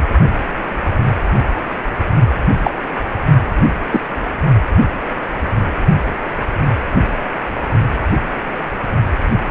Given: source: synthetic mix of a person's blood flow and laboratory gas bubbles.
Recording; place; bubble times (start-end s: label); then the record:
Doppler ultrasound of blood flow; precordium
2.64-2.74 s: bubbles
3.90-4.00 s: bubbles
From the record:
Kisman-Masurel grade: 123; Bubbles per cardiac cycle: 1 to 2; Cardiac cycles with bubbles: 10 to 50%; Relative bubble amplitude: loud (0.450 to 0.775); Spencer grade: 2 (many but less than half of the cardiac periods contain bubble signals, singularly or in groups); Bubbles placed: only in the low amplitude regions of the cardiac cycle